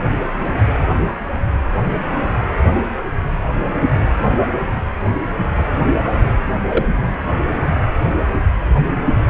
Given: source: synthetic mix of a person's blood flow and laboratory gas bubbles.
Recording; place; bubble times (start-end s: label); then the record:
Doppler ultrasound of blood flow; precordium
6.70-6.84 s: bubbles
From the record:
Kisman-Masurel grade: 122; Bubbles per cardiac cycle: 1 to 2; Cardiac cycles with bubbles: 10 to 50%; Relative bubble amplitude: moderate (0.250 to 0.450); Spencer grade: 2 (many but less than half of the cardiac periods contain bubble signals, singularly or in groups); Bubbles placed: anywhere in the cardiac cycle